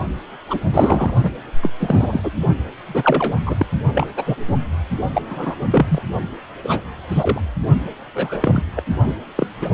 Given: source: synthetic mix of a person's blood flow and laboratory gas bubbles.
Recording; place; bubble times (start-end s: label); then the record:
Doppler ultrasound of blood flow; precordium
0.48-0.59 s: bubbles
0.72-1.14 s: bubbles
1.23-1.32 s: bubbles
1.62-1.73 s: bubbles
1.80-2.21 s: bubbles
2.23-2.31 s: bubbles
2.85-3.39 s: bubbles
3.46-3.56 s: bubbles
3.58-3.66 s: bubbles
3.93-4.07 s: bubbles
4.17-4.24 s: bubbles
4.26-4.36 s: bubbles
4.48-4.58 s: bubbles
5.15-5.21 s: bubbles
5.29-5.54 s: bubbles
5.71-6.02 s: bubbles
6.63-6.80 s: bubbles
7.08-7.41 s: bubbles
8.15-8.38 s: bubbles
8.41-8.62 s: bubbles
8.76-8.82 s: bubbles
9.04-9.14 s: bubbles
9.36-9.47 s: bubbles
9.61-9.71 s: bubbles
From the record:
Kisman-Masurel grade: 242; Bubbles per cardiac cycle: several, 3 to 8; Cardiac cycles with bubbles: 100%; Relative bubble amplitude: moderate (0.250 to 0.450); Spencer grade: 3 (all of the cardiac periods contain showers or single bubble signals, but not dominating or overriding the cardiac motion signals); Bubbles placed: only in the low amplitude regions of the cardiac cycle